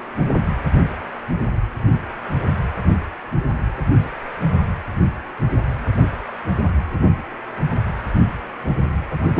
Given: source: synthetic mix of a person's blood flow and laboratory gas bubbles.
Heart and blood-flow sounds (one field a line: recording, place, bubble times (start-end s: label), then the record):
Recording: Doppler ultrasound of blood flow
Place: precordium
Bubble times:
9.34-9.40 s: bubbles
From the record:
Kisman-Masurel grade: 113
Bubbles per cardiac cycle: 1 to 2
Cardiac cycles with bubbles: 1 to 10%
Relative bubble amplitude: loud (0.450 to 0.775)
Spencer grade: 1 (occasional bubble signal discernible with the cardiac motion signal, with majority of cardiac periods free of bubbles)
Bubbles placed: anywhere in the cardiac cycle